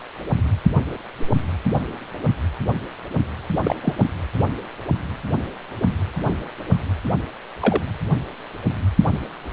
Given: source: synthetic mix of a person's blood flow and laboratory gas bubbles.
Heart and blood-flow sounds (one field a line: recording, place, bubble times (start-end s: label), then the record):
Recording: Doppler ultrasound of blood flow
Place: precordium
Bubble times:
3.63-3.75 s: bubbles
3.82-3.94 s: bubbles
6.27-6.33 s: bubbles
7.60-7.81 s: bubbles
From the record:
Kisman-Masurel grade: 122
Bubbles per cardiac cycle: 1 to 2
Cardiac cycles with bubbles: 10 to 50%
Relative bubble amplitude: moderate (0.250 to 0.450)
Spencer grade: 2 (many but less than half of the cardiac periods contain bubble signals, singularly or in groups)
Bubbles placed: anywhere in the cardiac cycle